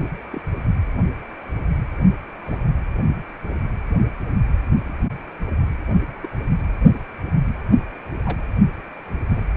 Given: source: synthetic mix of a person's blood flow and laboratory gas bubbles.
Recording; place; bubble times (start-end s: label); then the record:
Doppler ultrasound of blood flow; precordium
0.00-0.11 s: bubbles
0.30-0.40 s: bubbles
2.44-2.58 s: bubbles
6.23-6.28 s: bubbles
8.25-8.38 s: bubbles
9.29-9.44 s: bubbles
From the record:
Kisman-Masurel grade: 121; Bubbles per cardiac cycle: 1 to 2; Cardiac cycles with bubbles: 10 to 50%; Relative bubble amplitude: barely perceptible (0.100 to 0.250); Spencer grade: 2 (many but less than half of the cardiac periods contain bubble signals, singularly or in groups); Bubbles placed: anywhere in the cardiac cycle